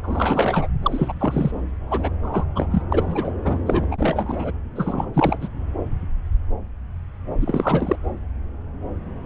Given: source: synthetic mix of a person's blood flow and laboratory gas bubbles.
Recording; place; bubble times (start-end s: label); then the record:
Doppler ultrasound of blood flow; subclavian vein
0.02-0.68 s: bubbles
0.82-1.12 s: bubbles
1.19-1.51 s: bubbles
1.87-2.10 s: bubbles
2.23-2.45 s: bubbles
2.56-2.68 s: bubbles
2.71-2.82 s: bubbles
2.92-3.31 s: bubbles
3.45-3.59 s: bubbles
3.66-3.85 s: bubbles
3.91-4.51 s: bubbles
4.75-5.07 s: bubbles
5.13-5.38 s: bubbles
5.40-5.47 s: bubbles
7.41-7.96 s: bubbles
From the record:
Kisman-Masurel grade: 332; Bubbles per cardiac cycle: rolling drumbeat, 9 or more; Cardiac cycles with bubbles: 50 to 99%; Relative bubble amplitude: moderate (0.250 to 0.450); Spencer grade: 3 (all of the cardiac periods contain showers or single bubble signals, but not dominating or overriding the cardiac motion signals); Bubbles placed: anywhere in the cardiac cycle